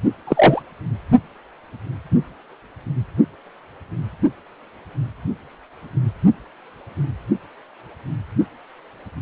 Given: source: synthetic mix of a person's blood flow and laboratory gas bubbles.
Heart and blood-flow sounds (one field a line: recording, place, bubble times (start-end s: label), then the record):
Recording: Doppler ultrasound of blood flow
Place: precordium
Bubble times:
0.27-0.61 s: bubbles
From the record:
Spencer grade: 1 (occasional bubble signal discernible with the cardiac motion signal, with majority of cardiac periods free of bubbles)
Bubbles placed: only in the low amplitude regions of the cardiac cycle